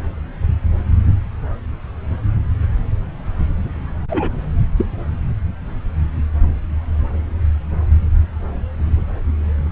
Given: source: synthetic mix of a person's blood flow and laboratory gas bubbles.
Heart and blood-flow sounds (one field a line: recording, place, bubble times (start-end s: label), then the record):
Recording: Doppler ultrasound of blood flow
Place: subclavian vein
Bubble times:
4.09-4.31 s: bubbles
4.76-4.85 s: bubbles
From the record:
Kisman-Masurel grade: 112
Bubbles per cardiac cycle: 1 to 2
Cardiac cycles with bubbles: 1 to 10%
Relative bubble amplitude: moderate (0.250 to 0.450)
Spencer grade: 1 (occasional bubble signal discernible with the cardiac motion signal, with majority of cardiac periods free of bubbles)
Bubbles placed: anywhere in the cardiac cycle